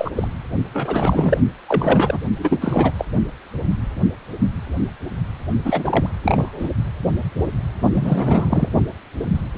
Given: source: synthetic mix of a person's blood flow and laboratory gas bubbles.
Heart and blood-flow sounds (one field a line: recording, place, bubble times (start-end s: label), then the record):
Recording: Doppler ultrasound of blood flow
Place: precordium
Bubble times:
0.00-0.10 s: bubbles
0.15-0.28 s: bubbles
0.73-1.38 s: bubbles
1.68-2.19 s: bubbles
2.38-2.92 s: bubbles
2.98-3.05 s: bubbles
5.64-6.09 s: bubbles
6.23-6.69 s: bubbles
7.93-8.69 s: bubbles
From the record:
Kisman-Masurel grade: 333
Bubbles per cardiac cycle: rolling drumbeat, 9 or more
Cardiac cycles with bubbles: 50 to 99%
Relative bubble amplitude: loud (0.450 to 0.775)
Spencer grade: 3 (all of the cardiac periods contain showers or single bubble signals, but not dominating or overriding the cardiac motion signals)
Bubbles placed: only in the low amplitude regions of the cardiac cycle